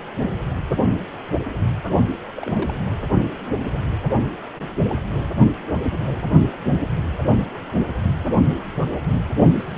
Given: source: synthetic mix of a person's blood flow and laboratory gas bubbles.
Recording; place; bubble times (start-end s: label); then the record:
Doppler ultrasound of blood flow; precordium
2.09-2.13 s: bubbles
2.34-2.87 s: bubbles
9.58-9.78 s: bubbles
From the record:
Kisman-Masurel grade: 221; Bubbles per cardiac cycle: several, 3 to 8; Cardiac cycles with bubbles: 10 to 50%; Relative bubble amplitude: barely perceptible (0.100 to 0.250); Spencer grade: 2 (many but less than half of the cardiac periods contain bubble signals, singularly or in groups); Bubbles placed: only in the low amplitude regions of the cardiac cycle